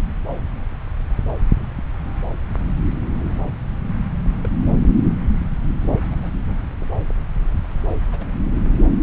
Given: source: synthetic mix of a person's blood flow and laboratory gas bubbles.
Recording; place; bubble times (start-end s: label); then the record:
Doppler ultrasound of blood flow; subclavian vein
4.43-4.48 s: bubbles
6.11-6.28 s: bubbles
7.88-7.94 s: bubbles
8.12-8.26 s: bubbles
From the record:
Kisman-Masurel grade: 121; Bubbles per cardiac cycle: 1 to 2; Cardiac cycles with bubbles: 10 to 50%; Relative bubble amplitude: barely perceptible (0.100 to 0.250); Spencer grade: 2 (many but less than half of the cardiac periods contain bubble signals, singularly or in groups); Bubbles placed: anywhere in the cardiac cycle